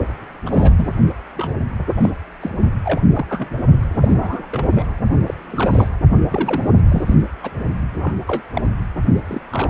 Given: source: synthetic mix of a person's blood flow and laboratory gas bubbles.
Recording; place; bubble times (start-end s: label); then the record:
Doppler ultrasound of blood flow; precordium
0.46-0.93 s: bubbles
1.36-1.55 s: bubbles
1.97-2.10 s: bubbles
2.42-2.51 s: bubbles
2.84-3.01 s: bubbles
3.14-3.26 s: bubbles
3.29-3.48 s: bubbles
3.90-4.47 s: bubbles
4.51-4.85 s: bubbles
5.26-5.34 s: bubbles
5.50-5.88 s: bubbles
6.29-6.67 s: bubbles
6.88-7.15 s: bubbles
7.42-7.50 s: bubbles
8.00-8.15 s: bubbles
8.27-8.42 s: bubbles
8.54-8.67 s: bubbles
9.27-9.41 s: bubbles
9.52-9.70 s: bubbles
From the record:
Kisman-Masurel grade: 242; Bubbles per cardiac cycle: several, 3 to 8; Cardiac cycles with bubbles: 100%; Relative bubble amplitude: moderate (0.250 to 0.450); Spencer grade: 3 (all of the cardiac periods contain showers or single bubble signals, but not dominating or overriding the cardiac motion signals); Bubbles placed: only in the low amplitude regions of the cardiac cycle